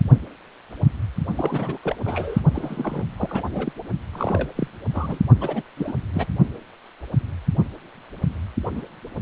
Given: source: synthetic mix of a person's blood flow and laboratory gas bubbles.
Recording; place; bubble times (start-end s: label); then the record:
Doppler ultrasound of blood flow; precordium
1.36-1.78 s: bubbles
1.82-1.96 s: bubbles
2.04-2.40 s: bubbles
2.53-3.04 s: bubbles
3.17-3.42 s: bubbles
3.52-3.72 s: bubbles
4.12-4.49 s: bubbles
4.55-4.68 s: bubbles
4.93-5.20 s: bubbles
5.41-5.63 s: bubbles
5.77-5.93 s: bubbles
6.13-6.27 s: bubbles
8.71-8.82 s: bubbles
From the record:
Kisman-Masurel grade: 332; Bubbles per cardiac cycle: rolling drumbeat, 9 or more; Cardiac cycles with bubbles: 50 to 99%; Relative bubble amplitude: moderate (0.250 to 0.450); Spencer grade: 3 (all of the cardiac periods contain showers or single bubble signals, but not dominating or overriding the cardiac motion signals); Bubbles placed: only in the low amplitude regions of the cardiac cycle